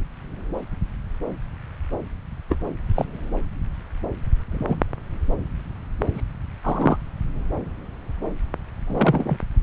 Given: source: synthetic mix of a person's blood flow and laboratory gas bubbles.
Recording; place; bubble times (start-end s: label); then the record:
Doppler ultrasound of blood flow; subclavian vein
2.49-2.57 s: bubbles
2.95-3.05 s: bubbles
4.51-4.75 s: bubbles
6.14-6.21 s: bubbles
6.63-6.97 s: bubbles
8.86-9.37 s: bubbles
From the record:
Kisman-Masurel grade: 122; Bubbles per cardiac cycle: 1 to 2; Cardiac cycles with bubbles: 10 to 50%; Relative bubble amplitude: moderate (0.250 to 0.450); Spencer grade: 2 (many but less than half of the cardiac periods contain bubble signals, singularly or in groups); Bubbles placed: anywhere in the cardiac cycle